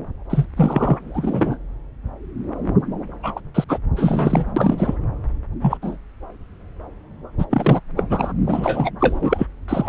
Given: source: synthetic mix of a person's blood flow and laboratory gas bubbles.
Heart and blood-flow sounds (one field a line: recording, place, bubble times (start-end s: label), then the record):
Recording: Doppler ultrasound of blood flow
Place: subclavian vein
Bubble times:
0.30-0.46 s: bubbles
0.57-1.00 s: bubbles
1.14-1.57 s: bubbles
3.23-3.41 s: bubbles
3.54-3.64 s: bubbles
3.69-3.79 s: bubbles
3.96-4.46 s: bubbles
4.56-4.95 s: bubbles
5.61-5.78 s: bubbles
5.82-5.97 s: bubbles
7.38-7.46 s: bubbles
7.50-7.80 s: bubbles
7.97-8.03 s: bubbles
8.10-8.32 s: bubbles
8.46-8.90 s: bubbles
8.99-9.46 s: bubbles
9.68-9.89 s: bubbles
From the record:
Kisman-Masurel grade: 233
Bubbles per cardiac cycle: several, 3 to 8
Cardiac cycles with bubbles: 50 to 99%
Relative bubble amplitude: loud (0.450 to 0.775)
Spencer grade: 3 (all of the cardiac periods contain showers or single bubble signals, but not dominating or overriding the cardiac motion signals)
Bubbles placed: anywhere in the cardiac cycle